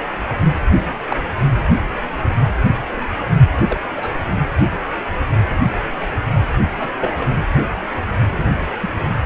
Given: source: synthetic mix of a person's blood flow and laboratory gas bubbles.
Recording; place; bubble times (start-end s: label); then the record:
Doppler ultrasound of blood flow; precordium
1.08-1.17 s: bubbles
1.39-1.60 s: bubbles
2.72-2.81 s: bubbles
3.69-3.80 s: bubbles
3.96-4.13 s: bubbles
6.73-6.92 s: bubbles
7.00-7.14 s: bubbles
8.31-8.51 s: bubbles
8.81-8.92 s: bubbles
From the record:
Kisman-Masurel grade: 122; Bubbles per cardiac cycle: 1 to 2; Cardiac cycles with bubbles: 10 to 50%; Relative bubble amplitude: moderate (0.250 to 0.450); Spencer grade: 2 (many but less than half of the cardiac periods contain bubble signals, singularly or in groups); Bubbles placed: only in the low amplitude regions of the cardiac cycle